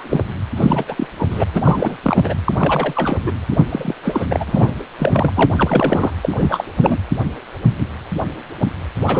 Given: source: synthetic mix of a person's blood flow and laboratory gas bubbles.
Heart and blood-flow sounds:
Doppler ultrasound of blood flow; precordium
0.00-0.23 s: bubbles
0.56-0.85 s: bubbles
0.88-1.07 s: bubbles
1.16-1.27 s: bubbles
1.30-1.44 s: bubbles
1.51-1.97 s: bubbles
2.03-2.34 s: bubbles
2.45-2.53 s: bubbles
2.57-3.19 s: bubbles
3.23-3.31 s: bubbles
3.51-3.66 s: bubbles
3.69-3.95 s: bubbles
4.03-4.25 s: bubbles
4.29-4.74 s: bubbles
4.98-5.33 s: bubbles
5.36-6.11 s: bubbles
6.21-6.64 s: bubbles
6.82-6.97 s: bubbles
9.00-9.20 s: bubbles
From the record:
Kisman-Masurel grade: 333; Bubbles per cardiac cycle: rolling drumbeat, 9 or more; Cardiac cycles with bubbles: 50 to 99%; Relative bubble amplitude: loud (0.450 to 0.775); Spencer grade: 3 (all of the cardiac periods contain showers or single bubble signals, but not dominating or overriding the cardiac motion signals); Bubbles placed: anywhere in the cardiac cycle

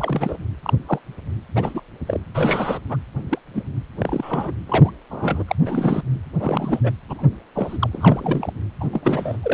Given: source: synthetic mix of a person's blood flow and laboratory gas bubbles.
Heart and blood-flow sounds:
Doppler ultrasound of blood flow; precordium
0.00-0.38 s: bubbles
0.62-0.73 s: bubbles
0.86-0.99 s: bubbles
1.55-1.81 s: bubbles
2.06-2.21 s: bubbles
2.34-2.81 s: bubbles
2.90-2.97 s: bubbles
3.30-3.39 s: bubbles
3.54-3.65 s: bubbles
3.99-4.52 s: bubbles
4.66-4.92 s: bubbles
5.10-5.44 s: bubbles
5.47-5.55 s: bubbles
5.65-6.03 s: bubbles
6.38-6.80 s: bubbles
6.83-6.92 s: bubbles
7.09-7.28 s: bubbles
7.55-8.53 s: bubbles
8.80-8.88 s: bubbles
8.93-9.37 s: bubbles
9.42-9.54 s: bubbles
From the record:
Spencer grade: 3 (all of the cardiac periods contain showers or single bubble signals, but not dominating or overriding the cardiac motion signals); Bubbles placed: anywhere in the cardiac cycle

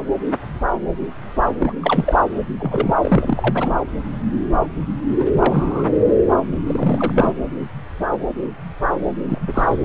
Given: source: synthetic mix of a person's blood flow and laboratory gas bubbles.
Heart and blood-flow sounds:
Doppler ultrasound of blood flow; subclavian vein
1.60-1.73 s: bubbles
1.81-2.19 s: bubbles
2.59-2.94 s: bubbles
3.02-3.69 s: bubbles
5.18-5.27 s: bubbles
5.34-5.94 s: bubbles
6.67-7.32 s: bubbles
9.19-9.79 s: bubbles
From the record:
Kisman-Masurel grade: 222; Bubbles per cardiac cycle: several, 3 to 8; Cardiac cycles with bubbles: 10 to 50%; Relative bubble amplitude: moderate (0.250 to 0.450); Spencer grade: 2 (many but less than half of the cardiac periods contain bubble signals, singularly or in groups); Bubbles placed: anywhere in the cardiac cycle

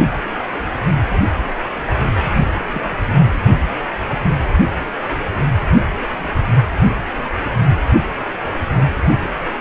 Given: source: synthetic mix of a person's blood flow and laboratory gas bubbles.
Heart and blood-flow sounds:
Doppler ultrasound of blood flow; precordium
2.59-2.67 s: bubbles
2.73-2.98 s: bubbles
From the record:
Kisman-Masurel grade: 111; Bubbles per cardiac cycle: 1 to 2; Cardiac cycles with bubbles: 1 to 10%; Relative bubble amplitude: barely perceptible (0.100 to 0.250); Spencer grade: 1 (occasional bubble signal discernible with the cardiac motion signal, with majority of cardiac periods free of bubbles); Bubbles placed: anywhere in the cardiac cycle

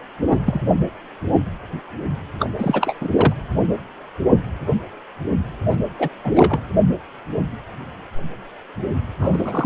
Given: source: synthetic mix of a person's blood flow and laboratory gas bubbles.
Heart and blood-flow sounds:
Doppler ultrasound of blood flow; precordium
0.26-0.40 s: bubbles
0.45-0.60 s: bubbles
2.40-2.49 s: bubbles
2.57-2.94 s: bubbles
3.00-3.09 s: bubbles
3.12-3.33 s: bubbles
5.70-5.76 s: bubbles
5.98-6.09 s: bubbles
6.23-6.32 s: bubbles
6.34-6.60 s: bubbles
9.19-9.66 s: bubbles
From the record:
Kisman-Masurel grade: 222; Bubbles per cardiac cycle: several, 3 to 8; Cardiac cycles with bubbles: 10 to 50%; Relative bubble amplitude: moderate (0.250 to 0.450); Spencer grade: 2 (many but less than half of the cardiac periods contain bubble signals, singularly or in groups); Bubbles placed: anywhere in the cardiac cycle

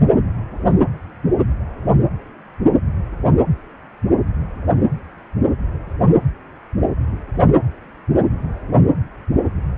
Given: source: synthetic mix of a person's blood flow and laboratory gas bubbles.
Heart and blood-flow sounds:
Doppler ultrasound of blood flow; precordium
no bubbles
From the record:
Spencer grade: 0 (complete lack of bubble signals)

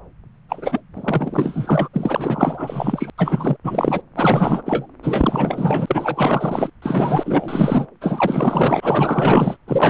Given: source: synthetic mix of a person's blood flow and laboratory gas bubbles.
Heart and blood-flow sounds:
Doppler ultrasound of blood flow; subclavian vein
0.48-0.81 s: bubbles
0.93-1.89 s: bubbles
1.93-3.10 s: bubbles
3.17-3.56 s: bubbles
3.63-4.01 s: bubbles
4.16-4.62 s: bubbles
4.66-4.87 s: bubbles
5.03-6.70 s: bubbles
6.82-7.87 s: bubbles
8.01-9.57 s: bubbles
9.68-9.90 s: bubbles
From the record:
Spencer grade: 4 (maximum detectable bubble signal sounding continuously throughout systole and diastole of every cardiac period, and overriding the amplitude of the normal cardiac signals); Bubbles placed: anywhere in the cardiac cycle

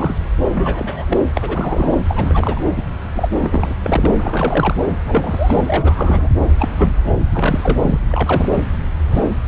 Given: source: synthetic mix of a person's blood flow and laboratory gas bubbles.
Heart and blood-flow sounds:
Doppler ultrasound of blood flow; subclavian vein
0.00-0.15 s: bubbles
0.54-1.04 s: bubbles
1.08-1.17 s: bubbles
1.35-1.98 s: bubbles
2.08-2.60 s: bubbles
2.76-2.82 s: bubbles
3.15-3.28 s: bubbles
3.42-3.74 s: bubbles
3.83-4.14 s: bubbles
4.17-4.75 s: bubbles
5.04-5.62 s: bubbles
5.67-6.29 s: bubbles
6.59-6.70 s: bubbles
6.78-6.95 s: bubbles
7.34-8.00 s: bubbles
8.09-8.51 s: bubbles
8.54-8.64 s: bubbles
9.10-9.29 s: bubbles
From the record:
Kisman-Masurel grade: 232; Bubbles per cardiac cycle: several, 3 to 8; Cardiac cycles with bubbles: 50 to 99%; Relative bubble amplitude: moderate (0.250 to 0.450); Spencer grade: 3 (all of the cardiac periods contain showers or single bubble signals, but not dominating or overriding the cardiac motion signals); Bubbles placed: anywhere in the cardiac cycle

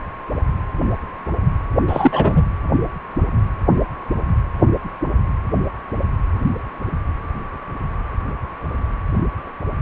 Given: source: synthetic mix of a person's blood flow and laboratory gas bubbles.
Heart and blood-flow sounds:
Doppler ultrasound of blood flow; precordium
1.87-2.43 s: bubbles
From the record:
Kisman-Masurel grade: 213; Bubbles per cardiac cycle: several, 3 to 8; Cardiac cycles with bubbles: 1 to 10%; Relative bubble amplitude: loud (0.450 to 0.775); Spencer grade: 1 (occasional bubble signal discernible with the cardiac motion signal, with majority of cardiac periods free of bubbles); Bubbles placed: anywhere in the cardiac cycle

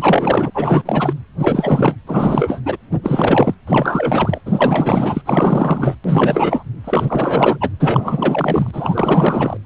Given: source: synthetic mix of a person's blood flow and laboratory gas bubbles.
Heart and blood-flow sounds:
Doppler ultrasound of blood flow; precordium
0.00-0.51 s: bubbles
0.54-0.82 s: bubbles
0.85-1.14 s: bubbles
1.38-1.96 s: bubbles
2.06-2.62 s: bubbles
2.65-2.77 s: bubbles
2.91-3.00 s: bubbles
3.03-3.54 s: bubbles
3.67-4.41 s: bubbles
4.46-5.21 s: bubbles
5.25-5.95 s: bubbles
6.04-6.65 s: bubbles
6.84-7.58 s: bubbles
7.61-7.71 s: bubbles
7.79-9.57 s: bubbles
From the record:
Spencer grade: 4 (maximum detectable bubble signal sounding continuously throughout systole and diastole of every cardiac period, and overriding the amplitude of the normal cardiac signals); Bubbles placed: anywhere in the cardiac cycle

